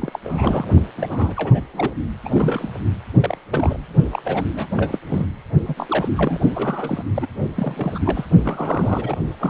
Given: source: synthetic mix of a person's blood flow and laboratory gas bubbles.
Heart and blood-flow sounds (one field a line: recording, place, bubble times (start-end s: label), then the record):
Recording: Doppler ultrasound of blood flow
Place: precordium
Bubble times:
0.00-0.19 s: bubbles
0.24-0.68 s: bubbles
0.97-1.33 s: bubbles
1.36-1.62 s: bubbles
1.73-1.93 s: bubbles
2.25-2.29 s: bubbles
2.31-2.70 s: bubbles
3.17-3.38 s: bubbles
3.50-3.80 s: bubbles
4.12-4.22 s: bubbles
4.24-4.43 s: bubbles
4.56-4.67 s: bubbles
4.70-4.98 s: bubbles
5.07-5.26 s: bubbles
5.67-5.74 s: bubbles
5.77-6.08 s: bubbles
6.14-6.39 s: bubbles
6.54-7.03 s: bubbles
7.15-7.27 s: bubbles
7.55-7.98 s: bubbles
8.05-8.25 s: bubbles
8.42-9.16 s: bubbles
9.39-9.50 s: bubbles
From the record:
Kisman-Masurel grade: 342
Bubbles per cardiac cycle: rolling drumbeat, 9 or more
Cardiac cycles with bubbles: 100%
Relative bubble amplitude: moderate (0.250 to 0.450)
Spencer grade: 3 (all of the cardiac periods contain showers or single bubble signals, but not dominating or overriding the cardiac motion signals)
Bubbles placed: only in the low amplitude regions of the cardiac cycle